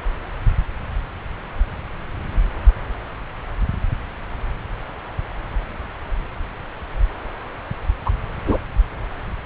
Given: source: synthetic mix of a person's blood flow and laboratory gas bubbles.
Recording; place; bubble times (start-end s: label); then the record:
Doppler ultrasound of blood flow; subclavian vein
8.05-8.10 s: bubbles
8.46-8.58 s: bubbles
From the record:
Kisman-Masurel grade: 113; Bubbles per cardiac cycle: 1 to 2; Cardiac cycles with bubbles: 1 to 10%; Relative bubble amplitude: loud (0.450 to 0.775); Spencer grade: 1 (occasional bubble signal discernible with the cardiac motion signal, with majority of cardiac periods free of bubbles); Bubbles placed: anywhere in the cardiac cycle